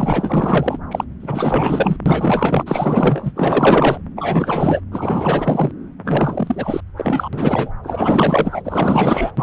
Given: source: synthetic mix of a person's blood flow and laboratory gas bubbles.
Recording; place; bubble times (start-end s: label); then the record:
Doppler ultrasound of blood flow; subclavian vein
0.00-0.79 s: bubbles
0.91-1.04 s: bubbles
1.20-1.97 s: bubbles
2.06-3.32 s: bubbles
3.36-3.98 s: bubbles
4.16-4.80 s: bubbles
4.92-5.71 s: bubbles
6.04-6.80 s: bubbles
6.97-7.29 s: bubbles
7.32-7.74 s: bubbles
7.83-9.31 s: bubbles
9.37-9.42 s: bubbles
From the record:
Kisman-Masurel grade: 444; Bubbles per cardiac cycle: continuous sound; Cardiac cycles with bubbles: 100%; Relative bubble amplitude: maximal (0.775 to 0.999); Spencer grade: 4 (maximum detectable bubble signal sounding continuously throughout systole and diastole of every cardiac period, and overriding the amplitude of the normal cardiac signals); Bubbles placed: anywhere in the cardiac cycle